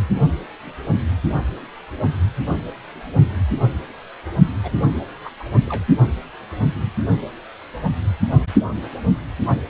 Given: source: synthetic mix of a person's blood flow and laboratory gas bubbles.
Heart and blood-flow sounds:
Doppler ultrasound of blood flow; precordium
4.63-4.71 s: bubbles
5.24-5.30 s: bubbles
5.39-5.43 s: bubbles
5.66-5.84 s: bubbles
From the record:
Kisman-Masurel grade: 211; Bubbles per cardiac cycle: several, 3 to 8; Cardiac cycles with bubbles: 1 to 10%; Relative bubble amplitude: barely perceptible (0.100 to 0.250); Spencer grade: 1 (occasional bubble signal discernible with the cardiac motion signal, with majority of cardiac periods free of bubbles); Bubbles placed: only in the low amplitude regions of the cardiac cycle

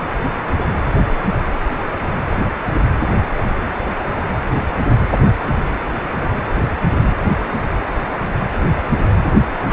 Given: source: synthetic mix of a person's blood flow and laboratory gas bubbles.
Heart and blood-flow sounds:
Doppler ultrasound of blood flow; precordium
9.62-9.73 s: bubbles
From the record:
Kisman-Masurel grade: 211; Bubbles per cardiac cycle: several, 3 to 8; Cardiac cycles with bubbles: 1 to 10%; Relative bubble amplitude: barely perceptible (0.100 to 0.250); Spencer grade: 1 (occasional bubble signal discernible with the cardiac motion signal, with majority of cardiac periods free of bubbles); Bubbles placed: anywhere in the cardiac cycle

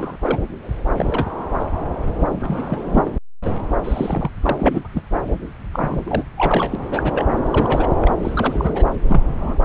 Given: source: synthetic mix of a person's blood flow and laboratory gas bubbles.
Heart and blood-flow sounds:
Doppler ultrasound of blood flow; subclavian vein
0.00-0.18 s: bubbles
0.21-0.39 s: bubbles
0.96-1.27 s: bubbles
1.58-1.66 s: bubbles
2.40-3.11 s: bubbles
3.44-3.50 s: bubbles
3.83-4.31 s: bubbles
4.42-4.82 s: bubbles
4.85-4.88 s: bubbles
4.94-5.02 s: bubbles
5.73-6.24 s: bubbles
6.38-6.76 s: bubbles
6.90-7.25 s: bubbles
7.51-7.87 s: bubbles
8.00-8.12 s: bubbles
8.21-8.85 s: bubbles
9.09-9.21 s: bubbles
9.25-9.58 s: bubbles
9.63-9.65 s: bubbles
From the record:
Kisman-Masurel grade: 242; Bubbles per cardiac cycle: several, 3 to 8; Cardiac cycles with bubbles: 100%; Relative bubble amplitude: moderate (0.250 to 0.450); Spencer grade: 3 (all of the cardiac periods contain showers or single bubble signals, but not dominating or overriding the cardiac motion signals); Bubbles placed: anywhere in the cardiac cycle

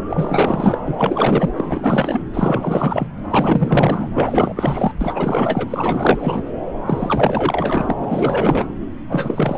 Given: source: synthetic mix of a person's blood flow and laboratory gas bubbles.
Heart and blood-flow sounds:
Doppler ultrasound of blood flow; subclavian vein
0.09-0.78 s: bubbles
0.84-1.49 s: bubbles
1.56-2.23 s: bubbles
2.33-3.09 s: bubbles
3.30-4.09 s: bubbles
4.14-4.54 s: bubbles
4.56-4.93 s: bubbles
5.01-6.42 s: bubbles
6.86-7.94 s: bubbles
8.00-8.74 s: bubbles
9.09-9.58 s: bubbles
From the record:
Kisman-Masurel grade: 444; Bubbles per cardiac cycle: continuous sound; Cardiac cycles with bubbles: 100%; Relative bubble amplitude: maximal (0.775 to 0.999); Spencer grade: 4 (maximum detectable bubble signal sounding continuously throughout systole and diastole of every cardiac period, and overriding the amplitude of the normal cardiac signals); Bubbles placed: anywhere in the cardiac cycle

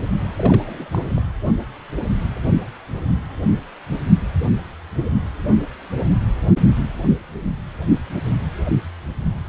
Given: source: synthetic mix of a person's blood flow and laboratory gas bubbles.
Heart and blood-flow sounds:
Doppler ultrasound of blood flow; precordium
0.37-1.22 s: bubbles
From the record:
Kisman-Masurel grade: 211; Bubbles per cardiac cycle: several, 3 to 8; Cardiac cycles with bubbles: 1 to 10%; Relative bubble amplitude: barely perceptible (0.100 to 0.250); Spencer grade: 1 (occasional bubble signal discernible with the cardiac motion signal, with majority of cardiac periods free of bubbles); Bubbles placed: anywhere in the cardiac cycle

